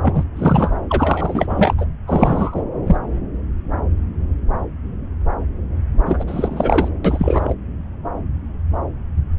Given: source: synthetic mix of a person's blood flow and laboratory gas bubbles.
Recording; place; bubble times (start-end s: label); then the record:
Doppler ultrasound of blood flow; subclavian vein
0.02-0.24 s: bubbles
0.36-0.77 s: bubbles
0.89-1.75 s: bubbles
1.78-1.87 s: bubbles
2.07-2.62 s: bubbles
2.86-2.96 s: bubbles
6.05-6.25 s: bubbles
6.27-6.88 s: bubbles
7.04-7.54 s: bubbles
From the record:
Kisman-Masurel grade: 333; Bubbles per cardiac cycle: rolling drumbeat, 9 or more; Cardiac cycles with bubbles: 50 to 99%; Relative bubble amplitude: loud (0.450 to 0.775); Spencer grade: 3 (all of the cardiac periods contain showers or single bubble signals, but not dominating or overriding the cardiac motion signals); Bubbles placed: anywhere in the cardiac cycle